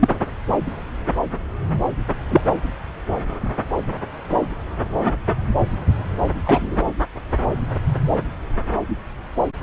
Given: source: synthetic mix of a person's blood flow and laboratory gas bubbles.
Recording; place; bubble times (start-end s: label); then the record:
Doppler ultrasound of blood flow; subclavian vein
0.00-0.08 s: bubbles
2.30-2.42 s: bubbles
6.44-6.77 s: bubbles
From the record:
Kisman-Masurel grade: 123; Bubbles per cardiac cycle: 1 to 2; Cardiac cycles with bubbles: 10 to 50%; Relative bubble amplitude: loud (0.450 to 0.775); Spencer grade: 2 (many but less than half of the cardiac periods contain bubble signals, singularly or in groups); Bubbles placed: anywhere in the cardiac cycle